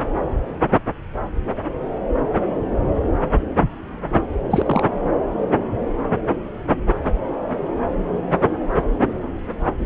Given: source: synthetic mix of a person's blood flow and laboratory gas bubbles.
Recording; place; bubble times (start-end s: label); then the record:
Doppler ultrasound of blood flow; subclavian vein
4.50-4.86 s: bubbles
From the record:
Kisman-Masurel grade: 213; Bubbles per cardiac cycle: several, 3 to 8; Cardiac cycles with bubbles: 1 to 10%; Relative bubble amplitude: loud (0.450 to 0.775); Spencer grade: 1 (occasional bubble signal discernible with the cardiac motion signal, with majority of cardiac periods free of bubbles); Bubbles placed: anywhere in the cardiac cycle